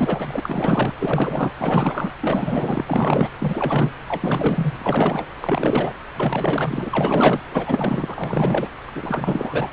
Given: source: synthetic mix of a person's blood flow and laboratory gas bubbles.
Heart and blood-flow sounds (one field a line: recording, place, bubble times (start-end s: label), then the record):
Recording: Doppler ultrasound of blood flow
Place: subclavian vein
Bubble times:
0.00-0.92 s: bubbles
0.99-1.53 s: bubbles
1.57-2.13 s: bubbles
2.21-3.29 s: bubbles
3.39-3.92 s: bubbles
4.06-5.26 s: bubbles
5.40-5.93 s: bubbles
6.17-7.42 s: bubbles
7.51-8.71 s: bubbles
8.88-9.70 s: bubbles
From the record:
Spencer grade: 4 (maximum detectable bubble signal sounding continuously throughout systole and diastole of every cardiac period, and overriding the amplitude of the normal cardiac signals)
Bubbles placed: anywhere in the cardiac cycle